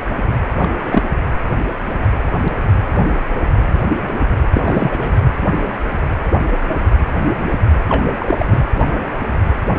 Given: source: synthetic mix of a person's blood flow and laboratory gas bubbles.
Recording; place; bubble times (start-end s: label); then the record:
Doppler ultrasound of blood flow; precordium
0.58-0.69 s: bubbles
0.76-1.03 s: bubbles
4.53-5.15 s: bubbles
7.89-8.05 s: bubbles
8.18-8.61 s: bubbles
From the record:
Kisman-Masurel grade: 223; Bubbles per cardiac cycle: several, 3 to 8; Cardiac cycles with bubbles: 10 to 50%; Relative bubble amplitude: loud (0.450 to 0.775); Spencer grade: 2 (many but less than half of the cardiac periods contain bubble signals, singularly or in groups); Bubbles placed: anywhere in the cardiac cycle